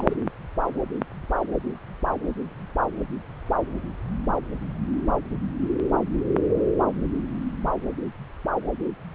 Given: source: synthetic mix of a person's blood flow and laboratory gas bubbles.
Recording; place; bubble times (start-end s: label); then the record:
Doppler ultrasound of blood flow; subclavian vein
0.00-0.05 s: bubbles
0.09-0.16 s: bubbles
From the record:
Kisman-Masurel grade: 111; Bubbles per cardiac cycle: 1 to 2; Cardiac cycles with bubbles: 1 to 10%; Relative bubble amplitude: barely perceptible (0.100 to 0.250); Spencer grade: 1 (occasional bubble signal discernible with the cardiac motion signal, with majority of cardiac periods free of bubbles); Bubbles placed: anywhere in the cardiac cycle